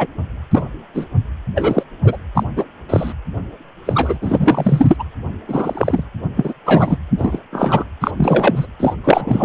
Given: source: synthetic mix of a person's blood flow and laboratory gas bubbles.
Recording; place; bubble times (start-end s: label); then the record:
Doppler ultrasound of blood flow; precordium
0.00-0.07 s: bubbles
0.51-0.63 s: bubbles
0.94-1.05 s: bubbles
1.55-1.83 s: bubbles
2.04-2.17 s: bubbles
2.34-2.44 s: bubbles
2.56-2.65 s: bubbles
2.89-3.12 s: bubbles
3.85-4.17 s: bubbles
4.21-5.03 s: bubbles
5.47-6.04 s: bubbles
6.36-6.53 s: bubbles
6.65-6.97 s: bubbles
7.18-7.39 s: bubbles
7.52-7.84 s: bubbles
8.01-8.11 s: bubbles
8.17-8.66 s: bubbles
8.79-8.94 s: bubbles
9.04-9.45 s: bubbles
From the record:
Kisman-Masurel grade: 243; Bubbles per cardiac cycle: several, 3 to 8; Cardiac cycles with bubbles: 100%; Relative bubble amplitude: loud (0.450 to 0.775); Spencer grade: 3 (all of the cardiac periods contain showers or single bubble signals, but not dominating or overriding the cardiac motion signals); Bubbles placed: anywhere in the cardiac cycle